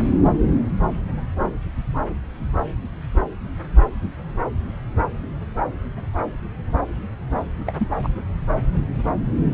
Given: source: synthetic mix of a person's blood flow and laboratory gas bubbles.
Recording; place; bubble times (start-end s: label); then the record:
Doppler ultrasound of blood flow; subclavian vein
7.67-7.72 s: bubbles
7.79-7.87 s: bubbles
8.03-8.10 s: bubbles
From the record:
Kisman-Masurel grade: 212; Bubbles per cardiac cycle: several, 3 to 8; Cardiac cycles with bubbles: 1 to 10%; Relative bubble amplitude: moderate (0.250 to 0.450); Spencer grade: 1 (occasional bubble signal discernible with the cardiac motion signal, with majority of cardiac periods free of bubbles); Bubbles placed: anywhere in the cardiac cycle